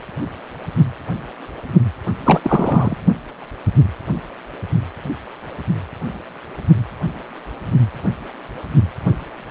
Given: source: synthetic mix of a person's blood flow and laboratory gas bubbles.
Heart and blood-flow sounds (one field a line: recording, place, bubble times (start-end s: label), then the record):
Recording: Doppler ultrasound of blood flow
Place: precordium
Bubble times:
2.23-2.40 s: bubbles
2.43-2.95 s: bubbles
From the record:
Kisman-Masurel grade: 213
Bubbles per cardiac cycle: several, 3 to 8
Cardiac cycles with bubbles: 1 to 10%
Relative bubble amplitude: loud (0.450 to 0.775)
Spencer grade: 1 (occasional bubble signal discernible with the cardiac motion signal, with majority of cardiac periods free of bubbles)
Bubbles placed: anywhere in the cardiac cycle